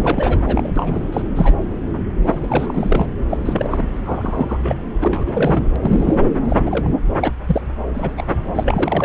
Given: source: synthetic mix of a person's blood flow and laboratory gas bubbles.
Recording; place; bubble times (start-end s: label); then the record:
Doppler ultrasound of blood flow; subclavian vein
0.00-0.71 s: bubbles
0.76-1.06 s: bubbles
1.12-1.24 s: bubbles
1.35-1.54 s: bubbles
2.26-2.40 s: bubbles
2.42-2.46 s: bubbles
2.49-3.07 s: bubbles
3.29-3.38 s: bubbles
3.45-3.88 s: bubbles
4.06-4.57 s: bubbles
4.62-4.75 s: bubbles
5.01-5.70 s: bubbles
5.73-5.76 s: bubbles
5.81-6.15 s: bubbles
6.49-6.57 s: bubbles
6.65-6.90 s: bubbles
7.21-7.33 s: bubbles
7.46-7.62 s: bubbles
7.94-8.26 s: bubbles
8.55-9.05 s: bubbles
From the record:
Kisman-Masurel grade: 232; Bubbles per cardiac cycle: several, 3 to 8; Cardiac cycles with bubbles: 50 to 99%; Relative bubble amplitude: moderate (0.250 to 0.450); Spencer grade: 3 (all of the cardiac periods contain showers or single bubble signals, but not dominating or overriding the cardiac motion signals); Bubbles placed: anywhere in the cardiac cycle